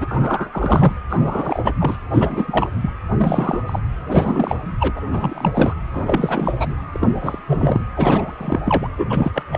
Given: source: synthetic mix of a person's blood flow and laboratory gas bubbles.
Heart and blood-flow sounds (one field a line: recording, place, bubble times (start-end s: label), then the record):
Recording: Doppler ultrasound of blood flow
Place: precordium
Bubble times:
0.00-0.93 s: bubbles
1.09-1.72 s: bubbles
1.79-1.97 s: bubbles
2.12-2.70 s: bubbles
2.81-2.90 s: bubbles
3.17-3.61 s: bubbles
3.67-3.79 s: bubbles
4.07-4.58 s: bubbles
4.79-4.93 s: bubbles
4.96-5.01 s: bubbles
5.07-5.75 s: bubbles
5.93-6.75 s: bubbles
6.92-7.42 s: bubbles
7.48-7.84 s: bubbles
7.96-8.61 s: bubbles
8.64-8.88 s: bubbles
8.97-9.31 s: bubbles
9.34-9.43 s: bubbles
9.52-9.58 s: bubbles
From the record:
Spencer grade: 3 (all of the cardiac periods contain showers or single bubble signals, but not dominating or overriding the cardiac motion signals)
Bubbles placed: anywhere in the cardiac cycle